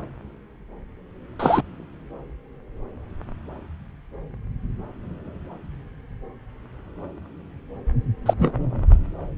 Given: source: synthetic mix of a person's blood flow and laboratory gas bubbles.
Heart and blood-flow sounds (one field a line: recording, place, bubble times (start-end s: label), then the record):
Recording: Doppler ultrasound of blood flow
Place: subclavian vein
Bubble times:
1.39-1.62 s: bubbles
8.26-8.34 s: bubbles
8.39-8.52 s: bubbles
From the record:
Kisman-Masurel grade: 123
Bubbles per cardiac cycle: 1 to 2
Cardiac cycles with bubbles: 10 to 50%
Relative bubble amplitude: loud (0.450 to 0.775)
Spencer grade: 2 (many but less than half of the cardiac periods contain bubble signals, singularly or in groups)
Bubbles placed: anywhere in the cardiac cycle